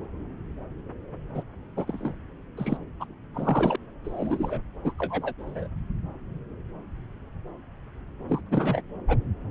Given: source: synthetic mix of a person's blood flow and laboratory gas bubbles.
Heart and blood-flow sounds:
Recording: Doppler ultrasound of blood flow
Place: subclavian vein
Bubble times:
1.34-1.43 s: bubbles
1.76-2.12 s: bubbles
2.57-2.77 s: bubbles
3.00-3.04 s: bubbles
3.34-3.76 s: bubbles
4.04-4.60 s: bubbles
4.85-4.92 s: bubbles
4.99-5.33 s: bubbles
5.39-5.68 s: bubbles
8.29-8.39 s: bubbles
8.50-8.81 s: bubbles
9.08-9.17 s: bubbles
From the record:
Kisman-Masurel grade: 232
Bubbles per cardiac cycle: several, 3 to 8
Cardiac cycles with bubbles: 50 to 99%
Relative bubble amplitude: moderate (0.250 to 0.450)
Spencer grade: 3 (all of the cardiac periods contain showers or single bubble signals, but not dominating or overriding the cardiac motion signals)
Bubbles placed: anywhere in the cardiac cycle

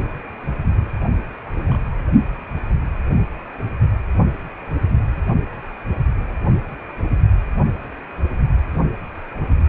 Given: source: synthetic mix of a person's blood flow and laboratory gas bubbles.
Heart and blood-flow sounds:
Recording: Doppler ultrasound of blood flow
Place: precordium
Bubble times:
1.00-1.04 s: bubbles
1.44-1.78 s: bubbles
From the record:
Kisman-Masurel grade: 111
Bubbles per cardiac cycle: 1 to 2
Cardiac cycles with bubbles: 1 to 10%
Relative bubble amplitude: barely perceptible (0.100 to 0.250)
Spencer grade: 1 (occasional bubble signal discernible with the cardiac motion signal, with majority of cardiac periods free of bubbles)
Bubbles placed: only in the low amplitude regions of the cardiac cycle

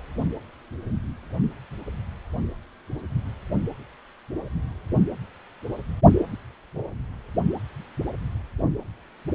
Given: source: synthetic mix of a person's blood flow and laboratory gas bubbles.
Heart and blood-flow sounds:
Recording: Doppler ultrasound of blood flow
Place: precordium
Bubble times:
no bubbles
From the record:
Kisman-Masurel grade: 000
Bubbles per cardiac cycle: 0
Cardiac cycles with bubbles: 0%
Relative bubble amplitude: no bubbles discernible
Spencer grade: 0 (complete lack of bubble signals)

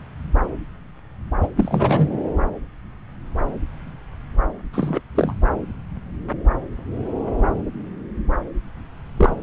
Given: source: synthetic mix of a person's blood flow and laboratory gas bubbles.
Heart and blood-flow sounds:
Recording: Doppler ultrasound of blood flow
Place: subclavian vein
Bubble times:
1.41-1.48 s: bubbles
1.56-2.08 s: bubbles
4.73-5.01 s: bubbles
5.15-5.33 s: bubbles
9.17-9.36 s: bubbles
From the record:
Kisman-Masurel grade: 222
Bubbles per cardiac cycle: several, 3 to 8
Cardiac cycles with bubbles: 10 to 50%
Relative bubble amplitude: moderate (0.250 to 0.450)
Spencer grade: 2 (many but less than half of the cardiac periods contain bubble signals, singularly or in groups)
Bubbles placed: anywhere in the cardiac cycle

